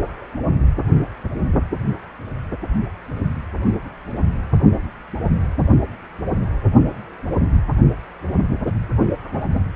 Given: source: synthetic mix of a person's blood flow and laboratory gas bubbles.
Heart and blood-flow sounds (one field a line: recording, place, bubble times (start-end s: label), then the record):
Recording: Doppler ultrasound of blood flow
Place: precordium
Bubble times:
no bubbles
From the record:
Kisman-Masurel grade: 000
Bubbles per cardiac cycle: 0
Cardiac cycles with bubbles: 0%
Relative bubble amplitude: no bubbles discernible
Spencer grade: 0 (complete lack of bubble signals)